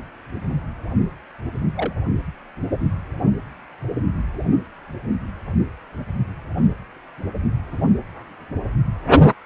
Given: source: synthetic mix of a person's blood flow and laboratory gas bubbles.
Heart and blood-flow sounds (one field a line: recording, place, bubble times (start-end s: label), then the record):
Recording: Doppler ultrasound of blood flow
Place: precordium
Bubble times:
1.75-1.93 s: bubbles
From the record:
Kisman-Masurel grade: 121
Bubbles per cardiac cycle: 1 to 2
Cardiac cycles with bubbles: 10 to 50%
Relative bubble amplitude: barely perceptible (0.100 to 0.250)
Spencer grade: 2 (many but less than half of the cardiac periods contain bubble signals, singularly or in groups)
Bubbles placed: only in the low amplitude regions of the cardiac cycle